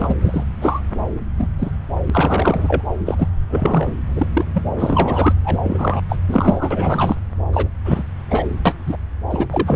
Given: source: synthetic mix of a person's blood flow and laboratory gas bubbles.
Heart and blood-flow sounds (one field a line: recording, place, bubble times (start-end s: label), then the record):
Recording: Doppler ultrasound of blood flow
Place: subclavian vein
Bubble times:
0.00-0.15 s: bubbles
0.21-0.44 s: bubbles
0.61-0.80 s: bubbles
1.38-1.47 s: bubbles
1.58-1.72 s: bubbles
2.07-2.10 s: bubbles
2.12-2.83 s: bubbles
3.06-3.28 s: bubbles
3.48-3.94 s: bubbles
4.15-4.27 s: bubbles
4.33-4.43 s: bubbles
4.54-4.62 s: bubbles
4.79-5.33 s: bubbles
5.42-6.01 s: bubbles
6.08-6.16 s: bubbles
6.28-7.16 s: bubbles
7.53-7.68 s: bubbles
7.84-8.03 s: bubbles
8.30-8.46 s: bubbles
8.65-8.74 s: bubbles
8.87-8.96 s: bubbles
9.31-9.46 s: bubbles
9.50-9.76 s: bubbles
From the record:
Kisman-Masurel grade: 243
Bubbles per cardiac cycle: several, 3 to 8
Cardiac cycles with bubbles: 100%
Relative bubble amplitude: loud (0.450 to 0.775)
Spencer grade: 3 (all of the cardiac periods contain showers or single bubble signals, but not dominating or overriding the cardiac motion signals)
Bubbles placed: anywhere in the cardiac cycle